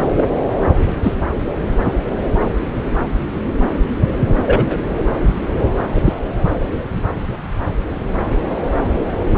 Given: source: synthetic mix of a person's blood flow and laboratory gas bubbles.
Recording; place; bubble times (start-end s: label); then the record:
Doppler ultrasound of blood flow; subclavian vein
0.16-0.25 s: bubbles
1.02-1.15 s: bubbles
4.46-4.79 s: bubbles
5.95-6.02 s: bubbles
6.05-6.12 s: bubbles
From the record:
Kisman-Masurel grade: 123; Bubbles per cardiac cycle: 1 to 2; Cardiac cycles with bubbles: 10 to 50%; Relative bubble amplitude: loud (0.450 to 0.775); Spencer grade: 2 (many but less than half of the cardiac periods contain bubble signals, singularly or in groups); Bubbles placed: anywhere in the cardiac cycle